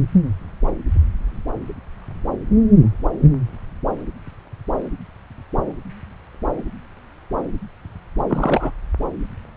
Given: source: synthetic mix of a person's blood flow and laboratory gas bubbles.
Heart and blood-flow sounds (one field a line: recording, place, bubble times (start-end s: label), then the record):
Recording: Doppler ultrasound of blood flow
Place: subclavian vein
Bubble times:
8.29-8.72 s: bubbles
From the record:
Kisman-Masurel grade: 212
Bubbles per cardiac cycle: several, 3 to 8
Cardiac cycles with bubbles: 1 to 10%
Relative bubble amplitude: moderate (0.250 to 0.450)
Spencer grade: 1 (occasional bubble signal discernible with the cardiac motion signal, with majority of cardiac periods free of bubbles)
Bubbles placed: anywhere in the cardiac cycle